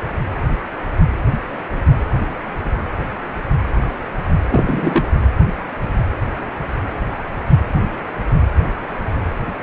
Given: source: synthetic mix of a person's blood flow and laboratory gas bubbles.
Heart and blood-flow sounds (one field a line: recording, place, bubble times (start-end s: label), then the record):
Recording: Doppler ultrasound of blood flow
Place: precordium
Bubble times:
4.49-5.10 s: bubbles
From the record:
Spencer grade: 1 (occasional bubble signal discernible with the cardiac motion signal, with majority of cardiac periods free of bubbles)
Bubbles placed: anywhere in the cardiac cycle